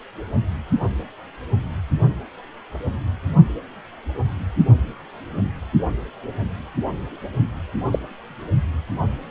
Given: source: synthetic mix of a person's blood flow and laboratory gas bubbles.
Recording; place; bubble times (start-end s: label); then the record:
Doppler ultrasound of blood flow; precordium
7.92-7.98 s: bubbles
From the record:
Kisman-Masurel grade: 112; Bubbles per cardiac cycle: 1 to 2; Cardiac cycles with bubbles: 1 to 10%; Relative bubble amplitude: moderate (0.250 to 0.450); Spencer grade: 1 (occasional bubble signal discernible with the cardiac motion signal, with majority of cardiac periods free of bubbles); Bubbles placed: only in the low amplitude regions of the cardiac cycle